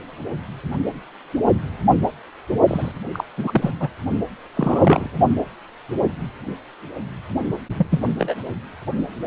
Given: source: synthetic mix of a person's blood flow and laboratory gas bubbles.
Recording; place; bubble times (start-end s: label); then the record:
Doppler ultrasound of blood flow; precordium
2.67-2.92 s: bubbles
3.13-3.24 s: bubbles
3.38-3.71 s: bubbles
3.79-3.88 s: bubbles
4.54-5.08 s: bubbles
7.78-7.87 s: bubbles
7.91-8.00 s: bubbles
8.19-8.34 s: bubbles
From the record:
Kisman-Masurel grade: 222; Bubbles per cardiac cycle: several, 3 to 8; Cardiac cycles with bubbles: 10 to 50%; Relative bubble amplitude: moderate (0.250 to 0.450); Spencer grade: 2 (many but less than half of the cardiac periods contain bubble signals, singularly or in groups); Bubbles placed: only in the low amplitude regions of the cardiac cycle